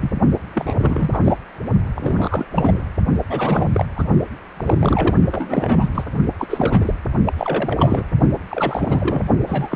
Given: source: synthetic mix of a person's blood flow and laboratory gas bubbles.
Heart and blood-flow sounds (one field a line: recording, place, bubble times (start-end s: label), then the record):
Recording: Doppler ultrasound of blood flow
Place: precordium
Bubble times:
0.01-0.11 s: bubbles
0.55-1.37 s: bubbles
1.95-2.45 s: bubbles
2.51-2.81 s: bubbles
3.29-3.85 s: bubbles
3.95-4.03 s: bubbles
4.57-5.16 s: bubbles
5.31-6.04 s: bubbles
6.39-6.46 s: bubbles
6.50-6.94 s: bubbles
7.27-7.33 s: bubbles
7.38-8.02 s: bubbles
8.50-9.23 s: bubbles
9.46-9.76 s: bubbles
From the record:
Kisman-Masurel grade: 342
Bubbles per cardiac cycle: rolling drumbeat, 9 or more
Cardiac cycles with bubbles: 100%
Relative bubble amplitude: moderate (0.250 to 0.450)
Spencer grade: 3 (all of the cardiac periods contain showers or single bubble signals, but not dominating or overriding the cardiac motion signals)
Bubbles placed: only in the low amplitude regions of the cardiac cycle